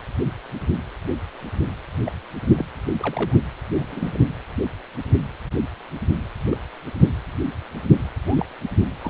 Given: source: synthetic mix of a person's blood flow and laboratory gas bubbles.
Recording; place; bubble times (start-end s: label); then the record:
Doppler ultrasound of blood flow; precordium
2.06-2.11 s: bubbles
2.48-2.64 s: bubbles
3.00-3.39 s: bubbles
3.75-4.23 s: bubbles
6.50-6.58 s: bubbles
8.27-8.46 s: bubbles
9.01-9.10 s: bubbles
From the record:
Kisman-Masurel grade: 121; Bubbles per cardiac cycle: 1 to 2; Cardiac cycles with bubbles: 10 to 50%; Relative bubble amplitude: barely perceptible (0.100 to 0.250); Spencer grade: 2 (many but less than half of the cardiac periods contain bubble signals, singularly or in groups); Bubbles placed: anywhere in the cardiac cycle